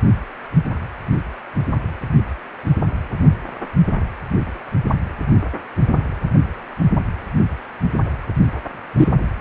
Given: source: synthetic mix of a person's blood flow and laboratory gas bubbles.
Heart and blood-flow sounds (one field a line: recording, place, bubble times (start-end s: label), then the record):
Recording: Doppler ultrasound of blood flow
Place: precordium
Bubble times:
8.97-9.08 s: bubbles
From the record:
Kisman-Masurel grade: 113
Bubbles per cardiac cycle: 1 to 2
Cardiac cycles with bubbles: 1 to 10%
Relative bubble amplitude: loud (0.450 to 0.775)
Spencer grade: 1 (occasional bubble signal discernible with the cardiac motion signal, with majority of cardiac periods free of bubbles)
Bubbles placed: anywhere in the cardiac cycle